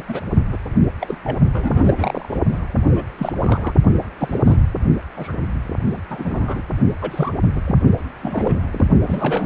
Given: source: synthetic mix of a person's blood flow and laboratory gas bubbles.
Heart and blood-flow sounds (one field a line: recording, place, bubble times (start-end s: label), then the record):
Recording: Doppler ultrasound of blood flow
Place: precordium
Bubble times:
0.00-0.05 s: bubbles
0.09-0.21 s: bubbles
0.51-0.57 s: bubbles
1.00-1.17 s: bubbles
1.24-1.38 s: bubbles
1.53-2.40 s: bubbles
2.52-2.58 s: bubbles
2.90-3.06 s: bubbles
3.18-3.33 s: bubbles
3.40-3.74 s: bubbles
4.18-4.40 s: bubbles
4.44-4.58 s: bubbles
5.17-5.32 s: bubbles
5.86-6.00 s: bubbles
6.10-6.62 s: bubbles
7.01-7.33 s: bubbles
7.55-7.61 s: bubbles
7.65-7.76 s: bubbles
8.23-8.54 s: bubbles
8.71-8.85 s: bubbles
9.03-9.46 s: bubbles
From the record:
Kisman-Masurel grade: 242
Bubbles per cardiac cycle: several, 3 to 8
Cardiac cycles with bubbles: 100%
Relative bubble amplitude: moderate (0.250 to 0.450)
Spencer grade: 3 (all of the cardiac periods contain showers or single bubble signals, but not dominating or overriding the cardiac motion signals)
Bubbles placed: only in the low amplitude regions of the cardiac cycle